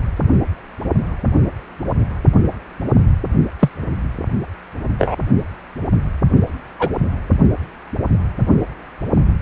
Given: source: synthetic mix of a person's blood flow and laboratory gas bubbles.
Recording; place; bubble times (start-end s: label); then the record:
Doppler ultrasound of blood flow; precordium
3.59-3.70 s: bubbles
4.98-5.17 s: bubbles
6.79-6.90 s: bubbles
From the record:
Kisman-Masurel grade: 123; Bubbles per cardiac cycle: 1 to 2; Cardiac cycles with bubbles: 10 to 50%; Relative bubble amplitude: loud (0.450 to 0.775); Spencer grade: 2 (many but less than half of the cardiac periods contain bubble signals, singularly or in groups); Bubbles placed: only in the low amplitude regions of the cardiac cycle